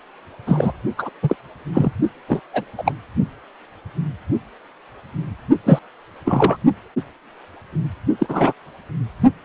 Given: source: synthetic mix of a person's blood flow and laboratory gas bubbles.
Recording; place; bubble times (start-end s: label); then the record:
Doppler ultrasound of blood flow; precordium
0.46-0.72 s: bubbles
0.98-1.10 s: bubbles
1.22-1.36 s: bubbles
1.73-1.92 s: bubbles
2.27-2.41 s: bubbles
2.53-2.64 s: bubbles
2.77-2.94 s: bubbles
5.64-5.79 s: bubbles
6.25-6.57 s: bubbles
8.19-8.53 s: bubbles
From the record:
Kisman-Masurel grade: 233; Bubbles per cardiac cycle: several, 3 to 8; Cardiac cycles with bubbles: 50 to 99%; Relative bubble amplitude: loud (0.450 to 0.775); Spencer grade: 3 (all of the cardiac periods contain showers or single bubble signals, but not dominating or overriding the cardiac motion signals); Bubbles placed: only in the low amplitude regions of the cardiac cycle